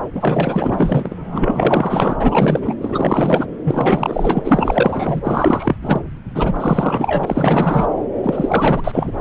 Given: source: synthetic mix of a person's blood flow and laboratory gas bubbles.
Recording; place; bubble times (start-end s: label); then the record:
Doppler ultrasound of blood flow; subclavian vein
0.15-2.17 s: bubbles
2.20-2.77 s: bubbles
2.81-3.46 s: bubbles
3.65-5.21 s: bubbles
5.24-5.76 s: bubbles
5.81-6.00 s: bubbles
6.34-7.86 s: bubbles
8.23-9.12 s: bubbles
From the record:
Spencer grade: 4 (maximum detectable bubble signal sounding continuously throughout systole and diastole of every cardiac period, and overriding the amplitude of the normal cardiac signals); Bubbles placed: anywhere in the cardiac cycle